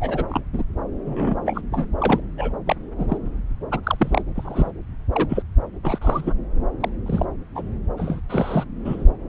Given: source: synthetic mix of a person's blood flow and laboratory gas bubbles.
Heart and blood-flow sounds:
Doppler ultrasound of blood flow; subclavian vein
0.00-0.25 s: bubbles
0.28-0.41 s: bubbles
0.53-0.62 s: bubbles
1.06-1.36 s: bubbles
1.46-1.61 s: bubbles
1.72-1.88 s: bubbles
1.98-2.21 s: bubbles
2.38-2.52 s: bubbles
2.66-2.76 s: bubbles
2.98-3.18 s: bubbles
3.72-3.80 s: bubbles
3.84-4.22 s: bubbles
4.35-4.71 s: bubbles
5.12-5.26 s: bubbles
5.29-5.42 s: bubbles
5.83-5.98 s: bubbles
6.01-6.33 s: bubbles
6.80-6.89 s: bubbles
7.06-7.25 s: bubbles
7.54-7.62 s: bubbles
7.97-8.20 s: bubbles
8.29-8.65 s: bubbles
8.85-9.04 s: bubbles
From the record:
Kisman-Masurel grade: 242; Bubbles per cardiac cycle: several, 3 to 8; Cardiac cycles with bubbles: 100%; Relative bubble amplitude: moderate (0.250 to 0.450); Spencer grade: 3 (all of the cardiac periods contain showers or single bubble signals, but not dominating or overriding the cardiac motion signals); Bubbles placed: anywhere in the cardiac cycle

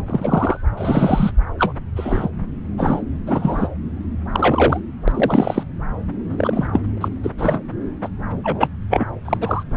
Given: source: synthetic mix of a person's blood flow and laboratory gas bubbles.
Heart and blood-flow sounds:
Doppler ultrasound of blood flow; subclavian vein
0.06-0.56 s: bubbles
0.77-1.31 s: bubbles
1.58-1.72 s: bubbles
1.96-2.29 s: bubbles
2.77-3.04 s: bubbles
3.27-3.68 s: bubbles
4.31-4.80 s: bubbles
5.08-5.63 s: bubbles
6.38-6.67 s: bubbles
6.72-6.85 s: bubbles
7.00-7.08 s: bubbles
7.22-7.30 s: bubbles
7.38-7.60 s: bubbles
8.03-8.09 s: bubbles
8.43-8.70 s: bubbles
8.90-9.07 s: bubbles
9.25-9.38 s: bubbles
9.41-9.63 s: bubbles
9.71-9.77 s: bubbles
From the record:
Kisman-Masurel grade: 243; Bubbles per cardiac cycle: several, 3 to 8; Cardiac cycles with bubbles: 100%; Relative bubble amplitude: loud (0.450 to 0.775); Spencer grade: 3 (all of the cardiac periods contain showers or single bubble signals, but not dominating or overriding the cardiac motion signals); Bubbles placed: anywhere in the cardiac cycle

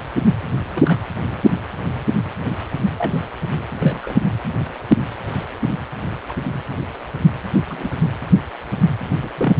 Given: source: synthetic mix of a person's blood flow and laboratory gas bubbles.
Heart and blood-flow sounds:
Doppler ultrasound of blood flow; precordium
0.74-1.00 s: bubbles
2.98-3.12 s: bubbles
3.77-4.16 s: bubbles
6.29-6.34 s: bubbles
7.70-7.96 s: bubbles
9.21-9.31 s: bubbles
9.37-9.54 s: bubbles
From the record:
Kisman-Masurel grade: 122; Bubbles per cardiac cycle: 1 to 2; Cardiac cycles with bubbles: 10 to 50%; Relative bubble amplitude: moderate (0.250 to 0.450); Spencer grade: 2 (many but less than half of the cardiac periods contain bubble signals, singularly or in groups); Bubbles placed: anywhere in the cardiac cycle

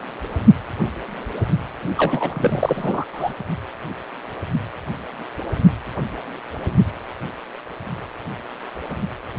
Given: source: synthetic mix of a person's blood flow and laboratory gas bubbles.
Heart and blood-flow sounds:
Doppler ultrasound of blood flow; precordium
1.97-3.05 s: bubbles
3.12-3.33 s: bubbles
From the record:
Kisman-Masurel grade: 212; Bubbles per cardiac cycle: several, 3 to 8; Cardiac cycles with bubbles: 1 to 10%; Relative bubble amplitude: moderate (0.250 to 0.450); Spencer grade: 1 (occasional bubble signal discernible with the cardiac motion signal, with majority of cardiac periods free of bubbles); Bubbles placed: only in the low amplitude regions of the cardiac cycle

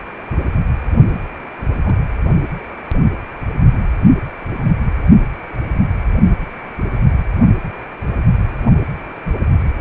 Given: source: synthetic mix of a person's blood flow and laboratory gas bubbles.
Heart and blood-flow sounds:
Doppler ultrasound of blood flow; precordium
1.10-1.26 s: bubbles
1.85-1.95 s: bubbles
From the record:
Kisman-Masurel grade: 121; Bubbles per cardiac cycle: 1 to 2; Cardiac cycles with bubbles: 10 to 50%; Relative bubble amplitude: barely perceptible (0.100 to 0.250); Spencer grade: 2 (many but less than half of the cardiac periods contain bubble signals, singularly or in groups); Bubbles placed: only in the low amplitude regions of the cardiac cycle

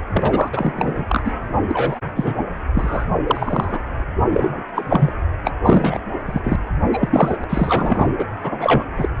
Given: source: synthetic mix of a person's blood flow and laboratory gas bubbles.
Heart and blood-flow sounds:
Doppler ultrasound of blood flow; precordium
0.13-0.48 s: bubbles
0.52-1.04 s: bubbles
1.07-1.31 s: bubbles
1.68-2.00 s: bubbles
2.14-2.39 s: bubbles
2.74-3.06 s: bubbles
3.27-3.79 s: bubbles
4.28-4.63 s: bubbles
4.75-5.12 s: bubbles
5.45-5.52 s: bubbles
5.65-5.99 s: bubbles
6.25-6.55 s: bubbles
6.93-7.37 s: bubbles
7.41-7.44 s: bubbles
7.49-8.12 s: bubbles
8.18-8.26 s: bubbles
8.43-8.84 s: bubbles
8.97-9.08 s: bubbles
From the record:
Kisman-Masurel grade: 243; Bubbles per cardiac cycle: several, 3 to 8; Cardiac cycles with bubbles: 100%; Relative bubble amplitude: loud (0.450 to 0.775); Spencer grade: 3 (all of the cardiac periods contain showers or single bubble signals, but not dominating or overriding the cardiac motion signals); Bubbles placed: anywhere in the cardiac cycle

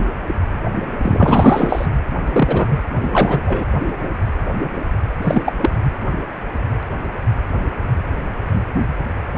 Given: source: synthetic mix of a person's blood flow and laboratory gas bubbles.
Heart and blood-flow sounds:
Doppler ultrasound of blood flow; precordium
1.02-1.86 s: bubbles
2.27-2.77 s: bubbles
3.01-3.40 s: bubbles
3.45-3.66 s: bubbles
5.21-5.43 s: bubbles
5.46-5.54 s: bubbles
5.62-5.72 s: bubbles
From the record:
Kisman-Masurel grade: 223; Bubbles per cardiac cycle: several, 3 to 8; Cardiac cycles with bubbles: 10 to 50%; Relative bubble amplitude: loud (0.450 to 0.775); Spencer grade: 2 (many but less than half of the cardiac periods contain bubble signals, singularly or in groups); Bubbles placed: anywhere in the cardiac cycle

